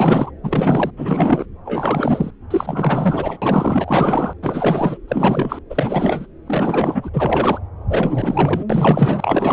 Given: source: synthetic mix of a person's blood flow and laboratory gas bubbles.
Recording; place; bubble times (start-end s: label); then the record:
Doppler ultrasound of blood flow; subclavian vein
0.00-0.31 s: bubbles
0.43-0.91 s: bubbles
0.96-1.46 s: bubbles
1.65-2.31 s: bubbles
2.50-3.38 s: bubbles
3.42-4.33 s: bubbles
4.42-4.98 s: bubbles
5.08-5.59 s: bubbles
5.70-6.26 s: bubbles
6.46-7.10 s: bubbles
7.13-7.58 s: bubbles
7.89-8.64 s: bubbles
8.70-9.53 s: bubbles
From the record:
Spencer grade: 4 (maximum detectable bubble signal sounding continuously throughout systole and diastole of every cardiac period, and overriding the amplitude of the normal cardiac signals); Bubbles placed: anywhere in the cardiac cycle